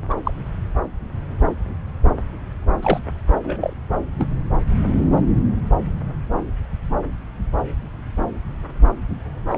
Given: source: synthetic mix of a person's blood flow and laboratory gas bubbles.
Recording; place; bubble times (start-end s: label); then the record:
Doppler ultrasound of blood flow; subclavian vein
0.10-0.15 s: bubbles
0.25-0.32 s: bubbles
2.81-3.00 s: bubbles
3.44-3.73 s: bubbles
4.18-4.28 s: bubbles
9.49-9.58 s: bubbles
From the record:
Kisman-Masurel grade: 122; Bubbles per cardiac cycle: 1 to 2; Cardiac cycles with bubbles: 10 to 50%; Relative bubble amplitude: moderate (0.250 to 0.450); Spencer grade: 2 (many but less than half of the cardiac periods contain bubble signals, singularly or in groups); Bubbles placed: anywhere in the cardiac cycle